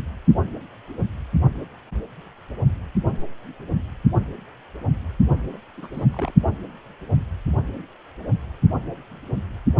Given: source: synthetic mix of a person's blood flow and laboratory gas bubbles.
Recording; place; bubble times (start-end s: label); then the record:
Doppler ultrasound of blood flow; precordium
5.53-5.57 s: bubbles
5.77-5.89 s: bubbles
5.93-6.07 s: bubbles
6.13-6.33 s: bubbles
From the record:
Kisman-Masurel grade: 211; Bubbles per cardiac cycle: several, 3 to 8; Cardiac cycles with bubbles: 1 to 10%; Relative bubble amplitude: barely perceptible (0.100 to 0.250); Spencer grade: 1 (occasional bubble signal discernible with the cardiac motion signal, with majority of cardiac periods free of bubbles); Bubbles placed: only in the low amplitude regions of the cardiac cycle